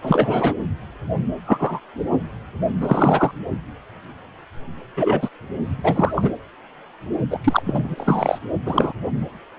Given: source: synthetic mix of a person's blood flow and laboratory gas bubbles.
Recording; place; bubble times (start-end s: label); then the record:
Doppler ultrasound of blood flow; precordium
0.01-0.54 s: bubbles
1.46-1.81 s: bubbles
2.80-3.31 s: bubbles
4.96-5.29 s: bubbles
5.79-6.32 s: bubbles
7.30-7.38 s: bubbles
7.44-7.94 s: bubbles
7.97-8.39 s: bubbles
8.66-8.93 s: bubbles
From the record:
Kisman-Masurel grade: 233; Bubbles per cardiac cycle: several, 3 to 8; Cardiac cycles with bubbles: 50 to 99%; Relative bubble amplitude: loud (0.450 to 0.775); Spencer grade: 3 (all of the cardiac periods contain showers or single bubble signals, but not dominating or overriding the cardiac motion signals); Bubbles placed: anywhere in the cardiac cycle